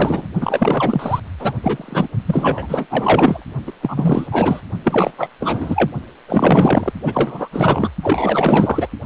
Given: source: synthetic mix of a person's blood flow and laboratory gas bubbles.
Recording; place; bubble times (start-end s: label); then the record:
Doppler ultrasound of blood flow; precordium
0.00-0.27 s: bubbles
0.40-1.20 s: bubbles
1.39-1.54 s: bubbles
1.63-2.08 s: bubbles
2.25-2.87 s: bubbles
2.90-3.44 s: bubbles
3.67-3.72 s: bubbles
3.81-4.27 s: bubbles
4.31-4.61 s: bubbles
4.84-5.10 s: bubbles
5.17-5.29 s: bubbles
5.40-5.91 s: bubbles
6.27-6.92 s: bubbles
7.02-7.49 s: bubbles
7.52-7.89 s: bubbles
8.03-8.88 s: bubbles
From the record:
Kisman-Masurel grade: 444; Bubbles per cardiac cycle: continuous sound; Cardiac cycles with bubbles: 100%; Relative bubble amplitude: maximal (0.775 to 0.999); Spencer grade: 4 (maximum detectable bubble signal sounding continuously throughout systole and diastole of every cardiac period, and overriding the amplitude of the normal cardiac signals); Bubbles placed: only in the low amplitude regions of the cardiac cycle